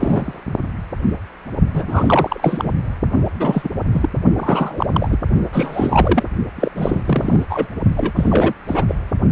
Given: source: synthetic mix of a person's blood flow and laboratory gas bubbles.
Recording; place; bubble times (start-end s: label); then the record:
Doppler ultrasound of blood flow; precordium
0.00-0.40 s: bubbles
1.73-2.71 s: bubbles
3.39-3.69 s: bubbles
3.94-4.09 s: bubbles
4.37-5.18 s: bubbles
5.52-6.23 s: bubbles
6.56-6.70 s: bubbles
6.75-7.44 s: bubbles
7.49-7.68 s: bubbles
7.96-8.12 s: bubbles
8.16-8.54 s: bubbles
8.67-8.85 s: bubbles
8.88-8.95 s: bubbles
From the record:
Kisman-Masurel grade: 333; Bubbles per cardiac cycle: rolling drumbeat, 9 or more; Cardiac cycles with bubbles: 50 to 99%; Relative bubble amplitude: loud (0.450 to 0.775); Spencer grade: 3 (all of the cardiac periods contain showers or single bubble signals, but not dominating or overriding the cardiac motion signals); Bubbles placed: only in the low amplitude regions of the cardiac cycle